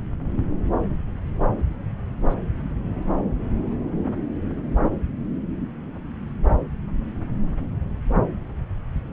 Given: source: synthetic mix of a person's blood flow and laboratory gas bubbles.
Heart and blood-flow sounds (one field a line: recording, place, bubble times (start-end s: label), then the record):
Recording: Doppler ultrasound of blood flow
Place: subclavian vein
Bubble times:
2.28-2.34 s: bubbles
From the record:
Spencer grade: 2 (many but less than half of the cardiac periods contain bubble signals, singularly or in groups)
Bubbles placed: anywhere in the cardiac cycle